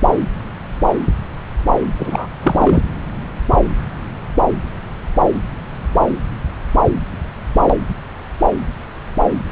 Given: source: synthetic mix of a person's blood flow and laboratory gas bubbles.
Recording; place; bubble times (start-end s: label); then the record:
Doppler ultrasound of blood flow; subclavian vein
1.99-2.27 s: bubbles
2.43-2.85 s: bubbles
From the record:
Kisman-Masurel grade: 212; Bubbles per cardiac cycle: several, 3 to 8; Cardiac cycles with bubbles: 1 to 10%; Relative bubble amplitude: moderate (0.250 to 0.450); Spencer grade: 1 (occasional bubble signal discernible with the cardiac motion signal, with majority of cardiac periods free of bubbles); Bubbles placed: anywhere in the cardiac cycle